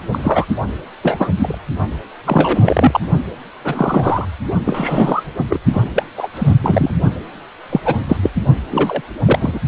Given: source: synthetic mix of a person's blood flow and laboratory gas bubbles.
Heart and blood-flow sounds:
Doppler ultrasound of blood flow; precordium
0.11-0.46 s: bubbles
1.03-1.30 s: bubbles
1.36-1.58 s: bubbles
2.24-3.00 s: bubbles
3.65-4.25 s: bubbles
4.65-5.33 s: bubbles
5.50-5.59 s: bubbles
5.73-5.83 s: bubbles
5.95-6.04 s: bubbles
6.17-6.29 s: bubbles
6.33-6.54 s: bubbles
6.62-6.91 s: bubbles
7.70-7.81 s: bubbles
7.85-7.96 s: bubbles
8.08-8.17 s: bubbles
8.22-8.30 s: bubbles
8.71-9.02 s: bubbles
9.20-9.60 s: bubbles
From the record:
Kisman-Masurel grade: 243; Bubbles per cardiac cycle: several, 3 to 8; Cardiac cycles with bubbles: 100%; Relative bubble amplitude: loud (0.450 to 0.775); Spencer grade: 3 (all of the cardiac periods contain showers or single bubble signals, but not dominating or overriding the cardiac motion signals); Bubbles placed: only in the low amplitude regions of the cardiac cycle

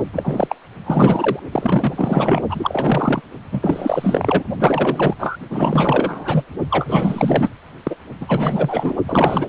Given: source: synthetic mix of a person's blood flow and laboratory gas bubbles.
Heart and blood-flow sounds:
Doppler ultrasound of blood flow; precordium
0.12-0.55 s: bubbles
0.85-1.40 s: bubbles
1.52-2.42 s: bubbles
2.49-3.21 s: bubbles
3.52-4.43 s: bubbles
4.59-5.14 s: bubbles
5.19-5.36 s: bubbles
5.49-6.43 s: bubbles
6.70-7.49 s: bubbles
7.83-7.96 s: bubbles
8.21-8.96 s: bubbles
9.07-9.49 s: bubbles
From the record:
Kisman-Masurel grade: 444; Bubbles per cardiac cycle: continuous sound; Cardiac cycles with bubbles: 100%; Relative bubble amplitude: maximal (0.775 to 0.999); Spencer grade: 4 (maximum detectable bubble signal sounding continuously throughout systole and diastole of every cardiac period, and overriding the amplitude of the normal cardiac signals); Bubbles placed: only in the low amplitude regions of the cardiac cycle

